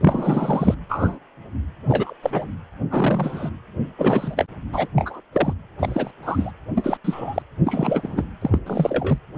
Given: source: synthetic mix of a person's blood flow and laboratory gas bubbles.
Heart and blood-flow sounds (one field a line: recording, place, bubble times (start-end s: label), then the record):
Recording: Doppler ultrasound of blood flow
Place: precordium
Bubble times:
0.01-0.75 s: bubbles
0.89-1.19 s: bubbles
1.87-2.13 s: bubbles
2.22-2.48 s: bubbles
2.91-3.50 s: bubbles
3.98-4.45 s: bubbles
4.72-4.88 s: bubbles
4.96-5.21 s: bubbles
5.33-5.54 s: bubbles
5.79-6.11 s: bubbles
6.22-6.51 s: bubbles
6.75-6.97 s: bubbles
7.04-7.42 s: bubbles
7.65-8.24 s: bubbles
8.41-8.58 s: bubbles
8.66-9.19 s: bubbles
From the record:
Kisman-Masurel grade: 243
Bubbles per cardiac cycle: several, 3 to 8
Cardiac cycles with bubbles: 100%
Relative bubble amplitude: loud (0.450 to 0.775)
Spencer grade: 3 (all of the cardiac periods contain showers or single bubble signals, but not dominating or overriding the cardiac motion signals)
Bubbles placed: anywhere in the cardiac cycle